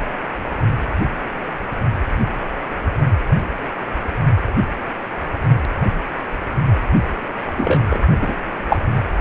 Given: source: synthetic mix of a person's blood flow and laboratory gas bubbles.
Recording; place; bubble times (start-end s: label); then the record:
Doppler ultrasound of blood flow; precordium
7.56-7.99 s: bubbles
8.21-8.36 s: bubbles
8.68-8.77 s: bubbles
From the record:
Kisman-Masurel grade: 123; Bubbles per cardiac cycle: 1 to 2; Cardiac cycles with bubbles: 10 to 50%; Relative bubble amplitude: loud (0.450 to 0.775); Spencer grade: 2 (many but less than half of the cardiac periods contain bubble signals, singularly or in groups); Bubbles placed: only in the low amplitude regions of the cardiac cycle